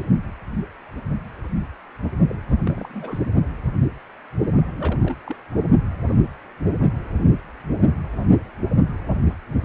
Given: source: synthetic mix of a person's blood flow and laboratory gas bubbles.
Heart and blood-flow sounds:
Doppler ultrasound of blood flow; precordium
2.28-2.35 s: bubbles
2.65-3.18 s: bubbles
4.71-5.16 s: bubbles
5.26-5.36 s: bubbles
5.52-5.61 s: bubbles
From the record:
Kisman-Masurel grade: 221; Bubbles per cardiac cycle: several, 3 to 8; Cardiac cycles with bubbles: 10 to 50%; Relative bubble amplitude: barely perceptible (0.100 to 0.250); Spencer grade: 2 (many but less than half of the cardiac periods contain bubble signals, singularly or in groups); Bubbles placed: only in the low amplitude regions of the cardiac cycle

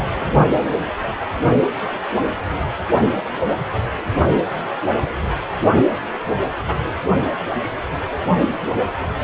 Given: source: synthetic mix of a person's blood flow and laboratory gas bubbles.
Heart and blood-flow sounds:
Doppler ultrasound of blood flow; precordium
0.14-0.25 s: bubbles
From the record:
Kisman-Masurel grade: 111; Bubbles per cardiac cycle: 1 to 2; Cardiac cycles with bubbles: 1 to 10%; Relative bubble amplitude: barely perceptible (0.100 to 0.250); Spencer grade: 1 (occasional bubble signal discernible with the cardiac motion signal, with majority of cardiac periods free of bubbles); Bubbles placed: only in the low amplitude regions of the cardiac cycle

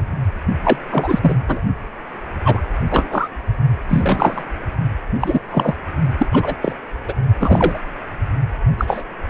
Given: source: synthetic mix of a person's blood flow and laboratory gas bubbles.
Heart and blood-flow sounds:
Doppler ultrasound of blood flow; precordium
0.00-0.03 s: bubbles
0.65-0.78 s: bubbles
0.91-1.19 s: bubbles
1.21-1.34 s: bubbles
1.47-1.61 s: bubbles
2.44-2.61 s: bubbles
2.91-3.29 s: bubbles
3.88-4.44 s: bubbles
5.20-5.39 s: bubbles
5.51-5.76 s: bubbles
6.18-6.27 s: bubbles
6.32-6.55 s: bubbles
6.61-6.73 s: bubbles
7.08-7.13 s: bubbles
7.40-7.78 s: bubbles
8.78-9.03 s: bubbles
From the record:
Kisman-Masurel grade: 243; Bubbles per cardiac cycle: several, 3 to 8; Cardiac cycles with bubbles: 100%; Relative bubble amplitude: loud (0.450 to 0.775); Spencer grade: 3 (all of the cardiac periods contain showers or single bubble signals, but not dominating or overriding the cardiac motion signals); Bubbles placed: only in the low amplitude regions of the cardiac cycle

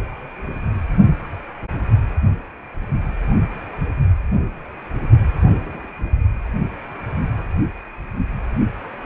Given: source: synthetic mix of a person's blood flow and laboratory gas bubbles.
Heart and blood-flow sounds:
Doppler ultrasound of blood flow; precordium
1.24-1.27 s: bubbles
5.65-5.93 s: bubbles
From the record:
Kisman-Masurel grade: 121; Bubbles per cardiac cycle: 1 to 2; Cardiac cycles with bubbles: 10 to 50%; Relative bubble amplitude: barely perceptible (0.100 to 0.250); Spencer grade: 2 (many but less than half of the cardiac periods contain bubble signals, singularly or in groups); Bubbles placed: anywhere in the cardiac cycle

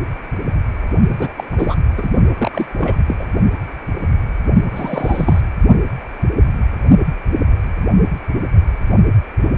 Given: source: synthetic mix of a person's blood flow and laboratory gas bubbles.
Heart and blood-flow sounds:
Doppler ultrasound of blood flow; precordium
1.08-1.33 s: bubbles
1.37-1.44 s: bubbles
1.52-1.75 s: bubbles
1.96-2.12 s: bubbles
2.38-2.66 s: bubbles
2.74-3.04 s: bubbles
3.08-3.15 s: bubbles
3.19-3.27 s: bubbles
4.71-5.41 s: bubbles
From the record:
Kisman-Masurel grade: 222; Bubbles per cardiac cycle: several, 3 to 8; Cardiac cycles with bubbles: 10 to 50%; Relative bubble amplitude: moderate (0.250 to 0.450); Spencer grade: 2 (many but less than half of the cardiac periods contain bubble signals, singularly or in groups); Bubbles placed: only in the low amplitude regions of the cardiac cycle

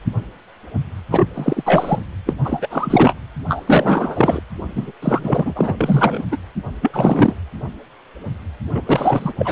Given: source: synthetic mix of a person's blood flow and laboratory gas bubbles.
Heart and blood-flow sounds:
Doppler ultrasound of blood flow; precordium
1.10-1.28 s: bubbles
1.34-1.97 s: bubbles
2.25-2.34 s: bubbles
2.43-3.13 s: bubbles
3.48-3.63 s: bubbles
3.66-4.41 s: bubbles
4.75-4.92 s: bubbles
5.02-5.74 s: bubbles
5.78-6.23 s: bubbles
6.32-6.38 s: bubbles
6.82-7.36 s: bubbles
8.73-8.82 s: bubbles
8.85-9.32 s: bubbles
9.38-9.52 s: bubbles
From the record:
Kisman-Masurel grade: 333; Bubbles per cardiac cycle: rolling drumbeat, 9 or more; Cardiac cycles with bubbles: 50 to 99%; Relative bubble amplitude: loud (0.450 to 0.775); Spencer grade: 3 (all of the cardiac periods contain showers or single bubble signals, but not dominating or overriding the cardiac motion signals); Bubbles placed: anywhere in the cardiac cycle

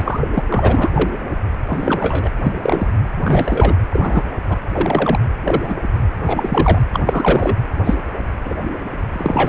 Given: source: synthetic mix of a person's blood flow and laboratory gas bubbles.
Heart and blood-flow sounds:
Doppler ultrasound of blood flow; precordium
0.00-0.29 s: bubbles
0.33-0.43 s: bubbles
0.49-1.10 s: bubbles
1.69-2.29 s: bubbles
2.43-2.52 s: bubbles
2.62-2.87 s: bubbles
3.23-3.74 s: bubbles
3.90-4.22 s: bubbles
4.48-4.56 s: bubbles
4.72-5.19 s: bubbles
5.43-5.74 s: bubbles
6.26-6.78 s: bubbles
6.93-7.00 s: bubbles
7.06-7.56 s: bubbles
7.83-7.96 s: bubbles
8.45-8.54 s: bubbles
9.12-9.49 s: bubbles
From the record:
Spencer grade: 3 (all of the cardiac periods contain showers or single bubble signals, but not dominating or overriding the cardiac motion signals); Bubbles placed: anywhere in the cardiac cycle

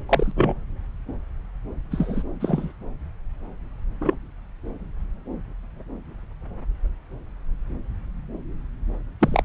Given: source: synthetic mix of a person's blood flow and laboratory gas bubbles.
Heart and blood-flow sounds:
Doppler ultrasound of blood flow; subclavian vein
0.08-0.31 s: bubbles
0.35-0.54 s: bubbles
1.91-2.23 s: bubbles
2.40-2.73 s: bubbles
4.01-4.14 s: bubbles
9.21-9.42 s: bubbles
From the record:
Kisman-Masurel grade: 123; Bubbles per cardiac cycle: 1 to 2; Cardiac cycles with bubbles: 10 to 50%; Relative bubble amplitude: loud (0.450 to 0.775); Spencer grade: 2 (many but less than half of the cardiac periods contain bubble signals, singularly or in groups); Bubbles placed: anywhere in the cardiac cycle

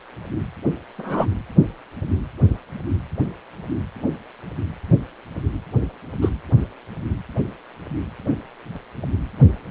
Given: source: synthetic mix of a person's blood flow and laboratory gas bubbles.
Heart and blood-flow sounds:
Doppler ultrasound of blood flow; precordium
0.98-1.26 s: bubbles
6.21-6.29 s: bubbles
From the record:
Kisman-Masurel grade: 123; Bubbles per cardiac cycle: 1 to 2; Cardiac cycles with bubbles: 10 to 50%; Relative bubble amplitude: loud (0.450 to 0.775); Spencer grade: 2 (many but less than half of the cardiac periods contain bubble signals, singularly or in groups); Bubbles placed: anywhere in the cardiac cycle

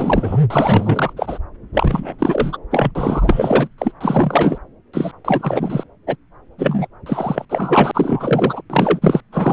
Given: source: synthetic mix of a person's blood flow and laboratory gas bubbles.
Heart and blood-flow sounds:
Doppler ultrasound of blood flow; subclavian vein
0.00-0.38 s: bubbles
0.50-1.13 s: bubbles
1.17-1.39 s: bubbles
1.73-2.15 s: bubbles
2.19-2.58 s: bubbles
2.71-2.92 s: bubbles
2.95-3.69 s: bubbles
3.78-3.92 s: bubbles
4.00-4.58 s: bubbles
4.93-5.11 s: bubbles
5.24-5.83 s: bubbles
6.06-6.15 s: bubbles
6.58-6.88 s: bubbles
7.06-7.45 s: bubbles
7.49-7.91 s: bubbles
7.94-8.62 s: bubbles
8.70-8.99 s: bubbles
9.02-9.21 s: bubbles
9.32-9.53 s: bubbles
From the record:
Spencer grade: 4 (maximum detectable bubble signal sounding continuously throughout systole and diastole of every cardiac period, and overriding the amplitude of the normal cardiac signals); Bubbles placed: anywhere in the cardiac cycle

